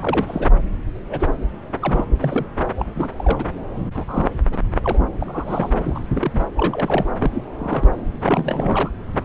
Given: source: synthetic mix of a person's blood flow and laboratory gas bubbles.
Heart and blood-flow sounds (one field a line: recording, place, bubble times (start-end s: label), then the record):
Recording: Doppler ultrasound of blood flow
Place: subclavian vein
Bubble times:
0.02-0.47 s: bubbles
1.08-1.27 s: bubbles
1.81-2.04 s: bubbles
2.21-2.46 s: bubbles
2.79-2.85 s: bubbles
2.94-3.09 s: bubbles
3.17-3.44 s: bubbles
3.94-4.05 s: bubbles
4.08-4.30 s: bubbles
4.51-4.59 s: bubbles
4.83-5.00 s: bubbles
5.20-5.73 s: bubbles
5.78-6.01 s: bubbles
6.11-6.43 s: bubbles
6.57-7.10 s: bubbles
7.19-7.44 s: bubbles
7.58-7.88 s: bubbles
8.20-8.90 s: bubbles
From the record:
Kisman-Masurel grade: 242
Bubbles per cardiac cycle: several, 3 to 8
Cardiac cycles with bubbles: 100%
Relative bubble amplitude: moderate (0.250 to 0.450)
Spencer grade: 3 (all of the cardiac periods contain showers or single bubble signals, but not dominating or overriding the cardiac motion signals)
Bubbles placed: anywhere in the cardiac cycle